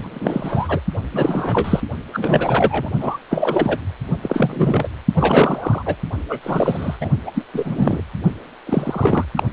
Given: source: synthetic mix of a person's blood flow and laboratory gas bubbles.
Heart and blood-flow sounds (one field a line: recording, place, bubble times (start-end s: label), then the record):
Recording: Doppler ultrasound of blood flow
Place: precordium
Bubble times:
0.00-0.79 s: bubbles
1.14-1.81 s: bubbles
2.13-2.90 s: bubbles
3.00-3.17 s: bubbles
3.31-3.79 s: bubbles
4.22-4.88 s: bubbles
5.13-5.83 s: bubbles
5.86-5.96 s: bubbles
6.29-6.39 s: bubbles
6.42-6.98 s: bubbles
7.00-7.10 s: bubbles
7.26-7.31 s: bubbles
7.33-7.43 s: bubbles
7.54-8.01 s: bubbles
8.67-9.26 s: bubbles
9.36-9.44 s: bubbles
From the record:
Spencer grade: 3 (all of the cardiac periods contain showers or single bubble signals, but not dominating or overriding the cardiac motion signals)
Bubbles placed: only in the low amplitude regions of the cardiac cycle